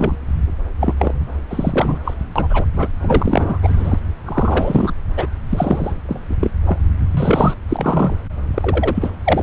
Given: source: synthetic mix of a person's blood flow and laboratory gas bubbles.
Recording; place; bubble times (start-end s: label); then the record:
Doppler ultrasound of blood flow; subclavian vein
0.00-0.16 s: bubbles
0.80-0.94 s: bubbles
0.97-1.14 s: bubbles
1.50-1.98 s: bubbles
2.04-2.14 s: bubbles
2.35-2.65 s: bubbles
2.76-2.88 s: bubbles
3.00-3.59 s: bubbles
3.62-4.00 s: bubbles
4.25-4.92 s: bubbles
5.17-5.29 s: bubbles
5.49-5.93 s: bubbles
6.08-6.20 s: bubbles
6.29-6.34 s: bubbles
6.39-6.50 s: bubbles
6.66-6.79 s: bubbles
7.10-7.54 s: bubbles
7.68-8.16 s: bubbles
8.54-9.11 s: bubbles
9.24-9.43 s: bubbles
From the record:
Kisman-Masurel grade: 343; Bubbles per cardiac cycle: rolling drumbeat, 9 or more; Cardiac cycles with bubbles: 100%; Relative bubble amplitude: loud (0.450 to 0.775); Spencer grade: 3 (all of the cardiac periods contain showers or single bubble signals, but not dominating or overriding the cardiac motion signals); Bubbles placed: anywhere in the cardiac cycle